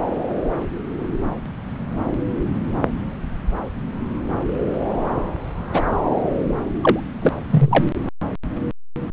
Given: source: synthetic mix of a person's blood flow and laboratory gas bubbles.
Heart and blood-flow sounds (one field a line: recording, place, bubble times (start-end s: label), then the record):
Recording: Doppler ultrasound of blood flow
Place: subclavian vein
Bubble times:
5.73-5.82 s: bubbles
6.81-6.99 s: bubbles
7.21-7.29 s: bubbles
7.50-7.84 s: bubbles
From the record:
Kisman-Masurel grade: 123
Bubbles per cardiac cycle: 1 to 2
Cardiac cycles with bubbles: 10 to 50%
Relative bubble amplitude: loud (0.450 to 0.775)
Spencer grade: 2 (many but less than half of the cardiac periods contain bubble signals, singularly or in groups)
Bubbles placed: anywhere in the cardiac cycle